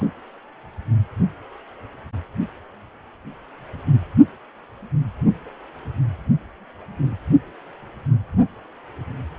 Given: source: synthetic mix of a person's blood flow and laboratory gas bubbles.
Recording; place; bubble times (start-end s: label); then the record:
Doppler ultrasound of blood flow; precordium
0.00-0.07 s: bubbles
From the record:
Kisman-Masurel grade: 111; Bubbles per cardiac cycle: 1 to 2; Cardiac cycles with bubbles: 1 to 10%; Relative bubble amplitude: barely perceptible (0.100 to 0.250); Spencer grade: 1 (occasional bubble signal discernible with the cardiac motion signal, with majority of cardiac periods free of bubbles); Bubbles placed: anywhere in the cardiac cycle